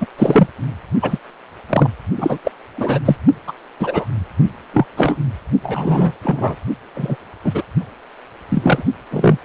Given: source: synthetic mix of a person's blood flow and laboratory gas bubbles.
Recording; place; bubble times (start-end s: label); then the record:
Doppler ultrasound of blood flow; precordium
0.01-0.06 s: bubbles
0.18-0.47 s: bubbles
1.02-1.19 s: bubbles
1.69-1.90 s: bubbles
2.17-2.38 s: bubbles
2.44-2.51 s: bubbles
2.77-2.99 s: bubbles
3.05-3.16 s: bubbles
3.47-3.53 s: bubbles
3.79-4.06 s: bubbles
4.73-4.86 s: bubbles
4.97-5.16 s: bubbles
5.62-6.14 s: bubbles
6.23-6.56 s: bubbles
6.94-7.16 s: bubbles
7.44-7.63 s: bubbles
8.48-8.83 s: bubbles
9.11-9.38 s: bubbles
From the record:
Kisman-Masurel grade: 243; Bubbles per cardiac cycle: several, 3 to 8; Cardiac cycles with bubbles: 100%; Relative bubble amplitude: loud (0.450 to 0.775); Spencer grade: 3 (all of the cardiac periods contain showers or single bubble signals, but not dominating or overriding the cardiac motion signals); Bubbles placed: only in the low amplitude regions of the cardiac cycle